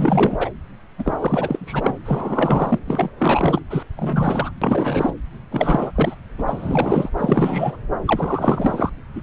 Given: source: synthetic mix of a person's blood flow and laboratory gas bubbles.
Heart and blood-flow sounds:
Doppler ultrasound of blood flow; subclavian vein
0.00-0.49 s: bubbles
0.98-1.95 s: bubbles
2.05-2.79 s: bubbles
2.88-3.10 s: bubbles
3.18-3.60 s: bubbles
3.70-3.83 s: bubbles
3.96-4.51 s: bubbles
4.62-5.12 s: bubbles
5.51-5.92 s: bubbles
5.95-6.15 s: bubbles
6.38-6.43 s: bubbles
6.47-7.09 s: bubbles
7.17-7.76 s: bubbles
8.05-8.89 s: bubbles
9.15-9.21 s: bubbles
From the record:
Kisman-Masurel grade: 342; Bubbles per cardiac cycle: rolling drumbeat, 9 or more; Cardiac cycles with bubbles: 100%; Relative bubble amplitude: moderate (0.250 to 0.450); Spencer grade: 3 (all of the cardiac periods contain showers or single bubble signals, but not dominating or overriding the cardiac motion signals); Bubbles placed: anywhere in the cardiac cycle

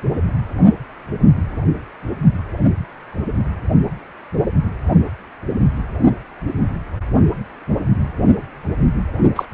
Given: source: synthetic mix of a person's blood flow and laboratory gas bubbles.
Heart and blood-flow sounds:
Doppler ultrasound of blood flow; precordium
9.36-9.45 s: bubbles
From the record:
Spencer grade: 1 (occasional bubble signal discernible with the cardiac motion signal, with majority of cardiac periods free of bubbles); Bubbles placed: only in the low amplitude regions of the cardiac cycle

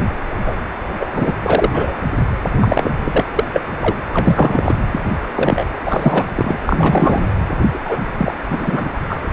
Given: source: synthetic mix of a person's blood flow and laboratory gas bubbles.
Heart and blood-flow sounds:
Doppler ultrasound of blood flow; precordium
0.45-0.56 s: bubbles
1.00-1.08 s: bubbles
1.14-1.33 s: bubbles
1.46-1.71 s: bubbles
1.73-1.94 s: bubbles
2.60-2.91 s: bubbles
3.04-3.23 s: bubbles
3.35-3.44 s: bubbles
3.54-3.63 s: bubbles
3.81-3.96 s: bubbles
4.12-4.75 s: bubbles
4.92-5.00 s: bubbles
5.36-5.64 s: bubbles
5.85-6.25 s: bubbles
6.35-6.59 s: bubbles
6.66-7.26 s: bubbles
7.73-7.97 s: bubbles
8.18-8.34 s: bubbles
8.50-8.90 s: bubbles
9.09-9.21 s: bubbles
From the record:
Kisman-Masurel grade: 243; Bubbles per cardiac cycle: several, 3 to 8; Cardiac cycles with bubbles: 100%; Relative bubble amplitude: loud (0.450 to 0.775); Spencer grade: 3 (all of the cardiac periods contain showers or single bubble signals, but not dominating or overriding the cardiac motion signals); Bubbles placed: anywhere in the cardiac cycle

